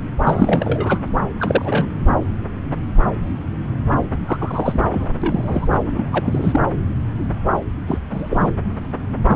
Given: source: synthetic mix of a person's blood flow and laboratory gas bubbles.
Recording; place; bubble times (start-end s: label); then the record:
Doppler ultrasound of blood flow; subclavian vein
0.23-0.99 s: bubbles
1.40-1.86 s: bubbles
4.25-4.88 s: bubbles
4.91-5.08 s: bubbles
5.21-5.68 s: bubbles
5.71-5.76 s: bubbles
5.84-6.09 s: bubbles
6.12-6.60 s: bubbles
7.87-7.98 s: bubbles
8.11-8.52 s: bubbles
9.27-9.36 s: bubbles
From the record:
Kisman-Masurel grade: 232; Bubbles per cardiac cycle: several, 3 to 8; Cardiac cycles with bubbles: 50 to 99%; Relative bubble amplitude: moderate (0.250 to 0.450); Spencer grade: 3 (all of the cardiac periods contain showers or single bubble signals, but not dominating or overriding the cardiac motion signals); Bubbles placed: anywhere in the cardiac cycle